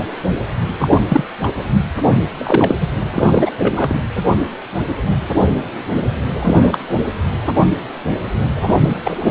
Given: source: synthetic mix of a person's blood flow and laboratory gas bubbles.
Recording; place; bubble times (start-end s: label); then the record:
Doppler ultrasound of blood flow; precordium
0.79-0.98 s: bubbles
1.08-1.25 s: bubbles
1.43-1.52 s: bubbles
2.13-2.29 s: bubbles
2.38-2.76 s: bubbles
2.80-2.87 s: bubbles
3.15-3.51 s: bubbles
3.58-3.98 s: bubbles
6.40-6.78 s: bubbles
8.56-8.73 s: bubbles
8.81-9.01 s: bubbles
9.04-9.31 s: bubbles
From the record:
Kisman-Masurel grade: 223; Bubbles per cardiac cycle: several, 3 to 8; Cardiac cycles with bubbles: 10 to 50%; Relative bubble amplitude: loud (0.450 to 0.775); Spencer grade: 2 (many but less than half of the cardiac periods contain bubble signals, singularly or in groups); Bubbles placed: anywhere in the cardiac cycle